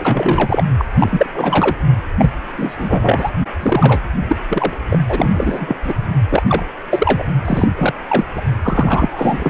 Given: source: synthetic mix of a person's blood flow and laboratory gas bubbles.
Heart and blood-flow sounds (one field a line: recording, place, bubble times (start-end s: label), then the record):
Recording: Doppler ultrasound of blood flow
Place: precordium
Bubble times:
0.00-0.64 s: bubbles
0.78-0.85 s: bubbles
0.98-1.27 s: bubbles
1.35-1.75 s: bubbles
2.19-2.30 s: bubbles
2.56-3.30 s: bubbles
3.60-4.00 s: bubbles
4.29-4.36 s: bubbles
4.48-4.77 s: bubbles
4.89-4.99 s: bubbles
5.09-5.77 s: bubbles
5.85-5.94 s: bubbles
6.29-6.43 s: bubbles
6.49-6.65 s: bubbles
6.91-7.24 s: bubbles
7.45-7.69 s: bubbles
7.76-7.94 s: bubbles
8.09-8.24 s: bubbles
8.35-8.42 s: bubbles
8.62-9.49 s: bubbles
From the record:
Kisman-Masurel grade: 343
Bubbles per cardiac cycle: rolling drumbeat, 9 or more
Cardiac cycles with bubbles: 100%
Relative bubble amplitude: loud (0.450 to 0.775)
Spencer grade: 3 (all of the cardiac periods contain showers or single bubble signals, but not dominating or overriding the cardiac motion signals)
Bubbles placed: anywhere in the cardiac cycle